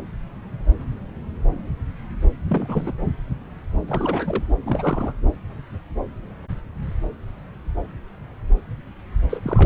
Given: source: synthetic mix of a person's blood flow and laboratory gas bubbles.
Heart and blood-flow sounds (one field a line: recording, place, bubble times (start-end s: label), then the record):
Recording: Doppler ultrasound of blood flow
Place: subclavian vein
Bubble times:
2.48-2.92 s: bubbles
3.88-4.44 s: bubbles
4.66-5.12 s: bubbles
9.29-9.40 s: bubbles
9.44-9.66 s: bubbles
From the record:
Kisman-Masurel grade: 221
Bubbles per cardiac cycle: several, 3 to 8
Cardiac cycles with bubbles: 10 to 50%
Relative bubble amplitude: barely perceptible (0.100 to 0.250)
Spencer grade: 2 (many but less than half of the cardiac periods contain bubble signals, singularly or in groups)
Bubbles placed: anywhere in the cardiac cycle